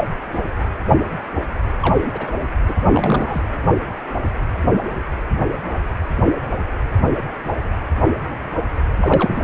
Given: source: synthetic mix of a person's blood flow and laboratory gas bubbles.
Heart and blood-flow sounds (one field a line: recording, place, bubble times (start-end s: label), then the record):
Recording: Doppler ultrasound of blood flow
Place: precordium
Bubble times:
0.00-0.04 s: bubbles
0.33-0.38 s: bubbles
1.82-2.31 s: bubbles
2.68-2.74 s: bubbles
2.89-3.42 s: bubbles
9.02-9.43 s: bubbles
From the record:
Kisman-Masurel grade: 222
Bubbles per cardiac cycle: several, 3 to 8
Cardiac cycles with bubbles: 10 to 50%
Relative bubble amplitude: moderate (0.250 to 0.450)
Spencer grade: 2 (many but less than half of the cardiac periods contain bubble signals, singularly or in groups)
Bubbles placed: anywhere in the cardiac cycle